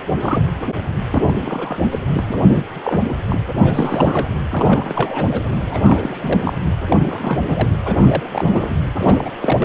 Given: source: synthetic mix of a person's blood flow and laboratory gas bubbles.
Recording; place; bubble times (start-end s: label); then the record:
Doppler ultrasound of blood flow; precordium
0.20-0.44 s: bubbles
1.11-1.23 s: bubbles
1.27-1.32 s: bubbles
1.46-1.77 s: bubbles
1.91-1.99 s: bubbles
2.13-2.34 s: bubbles
2.54-2.64 s: bubbles
2.83-3.13 s: bubbles
3.28-3.40 s: bubbles
3.61-4.36 s: bubbles
4.50-5.25 s: bubbles
5.31-5.42 s: bubbles
5.52-5.61 s: bubbles
5.70-6.53 s: bubbles
6.89-7.38 s: bubbles
7.49-7.69 s: bubbles
7.85-7.94 s: bubbles
8.01-8.76 s: bubbles
8.98-9.30 s: bubbles
9.40-9.65 s: bubbles
From the record:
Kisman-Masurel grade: 342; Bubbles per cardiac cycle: rolling drumbeat, 9 or more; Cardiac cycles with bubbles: 100%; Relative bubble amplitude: moderate (0.250 to 0.450); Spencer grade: 3 (all of the cardiac periods contain showers or single bubble signals, but not dominating or overriding the cardiac motion signals); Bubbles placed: anywhere in the cardiac cycle